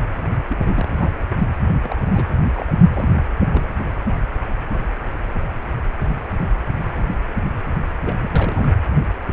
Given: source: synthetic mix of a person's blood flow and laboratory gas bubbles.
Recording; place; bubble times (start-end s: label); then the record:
Doppler ultrasound of blood flow; precordium
0.48-0.88 s: bubbles
0.99-1.15 s: bubbles
1.82-1.94 s: bubbles
2.12-2.33 s: bubbles
2.56-2.73 s: bubbles
2.93-3.15 s: bubbles
3.49-3.85 s: bubbles
4.06-4.15 s: bubbles
8.04-8.15 s: bubbles
8.21-8.72 s: bubbles
From the record:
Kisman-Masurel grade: 221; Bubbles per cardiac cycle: several, 3 to 8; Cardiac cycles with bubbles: 10 to 50%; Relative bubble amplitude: barely perceptible (0.100 to 0.250); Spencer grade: 2 (many but less than half of the cardiac periods contain bubble signals, singularly or in groups); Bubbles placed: only in the low amplitude regions of the cardiac cycle